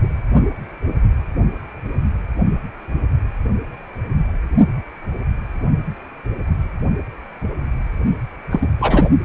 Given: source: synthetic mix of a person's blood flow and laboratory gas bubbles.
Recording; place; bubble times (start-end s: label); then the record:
Doppler ultrasound of blood flow; precordium
8.50-8.67 s: bubbles
8.79-9.09 s: bubbles
From the record:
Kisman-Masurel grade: 223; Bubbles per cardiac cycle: several, 3 to 8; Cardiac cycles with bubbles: 10 to 50%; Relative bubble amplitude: loud (0.450 to 0.775); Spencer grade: 2 (many but less than half of the cardiac periods contain bubble signals, singularly or in groups); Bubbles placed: only in the low amplitude regions of the cardiac cycle